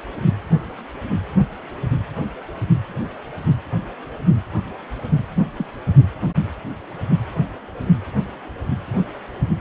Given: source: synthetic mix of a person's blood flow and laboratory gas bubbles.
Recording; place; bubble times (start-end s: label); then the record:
Doppler ultrasound of blood flow; precordium
5.58-5.66 s: bubbles
5.87-5.93 s: bubbles
From the record:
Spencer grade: 1 (occasional bubble signal discernible with the cardiac motion signal, with majority of cardiac periods free of bubbles); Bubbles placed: anywhere in the cardiac cycle